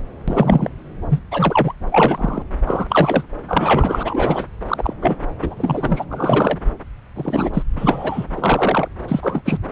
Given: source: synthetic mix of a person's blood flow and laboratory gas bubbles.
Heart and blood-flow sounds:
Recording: Doppler ultrasound of blood flow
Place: subclavian vein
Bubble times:
0.28-0.69 s: bubbles
1.09-1.20 s: bubbles
1.31-1.73 s: bubbles
1.91-2.42 s: bubbles
2.66-3.23 s: bubbles
3.48-4.45 s: bubbles
4.68-4.94 s: bubbles
5.01-5.17 s: bubbles
5.42-6.05 s: bubbles
6.09-6.58 s: bubbles
7.16-7.50 s: bubbles
7.54-7.62 s: bubbles
7.77-8.24 s: bubbles
8.35-8.88 s: bubbles
9.07-9.42 s: bubbles
9.45-9.57 s: bubbles
From the record:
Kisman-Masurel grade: 243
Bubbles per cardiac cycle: several, 3 to 8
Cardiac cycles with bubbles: 100%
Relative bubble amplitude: loud (0.450 to 0.775)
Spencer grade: 3 (all of the cardiac periods contain showers or single bubble signals, but not dominating or overriding the cardiac motion signals)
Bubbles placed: anywhere in the cardiac cycle

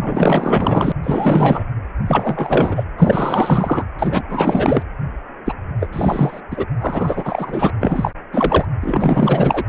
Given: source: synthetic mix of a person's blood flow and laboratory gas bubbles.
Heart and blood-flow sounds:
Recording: Doppler ultrasound of blood flow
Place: precordium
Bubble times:
0.00-0.92 s: bubbles
1.03-1.64 s: bubbles
2.06-2.84 s: bubbles
2.98-3.84 s: bubbles
3.99-4.22 s: bubbles
4.29-4.83 s: bubbles
5.46-5.53 s: bubbles
5.79-5.90 s: bubbles
5.92-6.41 s: bubbles
6.50-6.66 s: bubbles
6.80-7.71 s: bubbles
7.80-8.11 s: bubbles
8.32-8.65 s: bubbles
8.81-9.63 s: bubbles
From the record:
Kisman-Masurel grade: 444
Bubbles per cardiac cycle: continuous sound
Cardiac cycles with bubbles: 100%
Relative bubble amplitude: maximal (0.775 to 0.999)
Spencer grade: 4 (maximum detectable bubble signal sounding continuously throughout systole and diastole of every cardiac period, and overriding the amplitude of the normal cardiac signals)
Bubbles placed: anywhere in the cardiac cycle

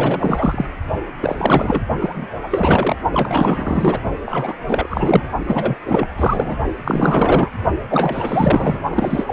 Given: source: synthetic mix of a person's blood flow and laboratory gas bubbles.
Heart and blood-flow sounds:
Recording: Doppler ultrasound of blood flow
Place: precordium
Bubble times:
0.00-0.65 s: bubbles
1.20-1.84 s: bubbles
2.00-2.29 s: bubbles
2.43-2.97 s: bubbles
3.11-4.01 s: bubbles
4.25-4.54 s: bubbles
4.67-5.29 s: bubbles
5.47-5.77 s: bubbles
5.84-6.07 s: bubbles
6.16-6.57 s: bubbles
6.84-7.50 s: bubbles
7.88-8.80 s: bubbles
8.90-9.33 s: bubbles
From the record:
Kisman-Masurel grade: 444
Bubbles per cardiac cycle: continuous sound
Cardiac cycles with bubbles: 100%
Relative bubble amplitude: maximal (0.775 to 0.999)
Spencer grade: 4 (maximum detectable bubble signal sounding continuously throughout systole and diastole of every cardiac period, and overriding the amplitude of the normal cardiac signals)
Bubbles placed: only in the low amplitude regions of the cardiac cycle

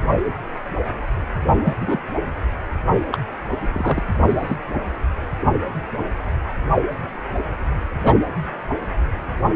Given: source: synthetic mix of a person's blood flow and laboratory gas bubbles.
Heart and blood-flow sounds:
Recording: Doppler ultrasound of blood flow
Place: precordium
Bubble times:
1.64-1.74 s: bubbles
1.80-1.98 s: bubbles
3.11-3.18 s: bubbles
3.75-4.01 s: bubbles
4.27-4.56 s: bubbles
8.04-8.14 s: bubbles
From the record:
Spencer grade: 2 (many but less than half of the cardiac periods contain bubble signals, singularly or in groups)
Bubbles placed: anywhere in the cardiac cycle

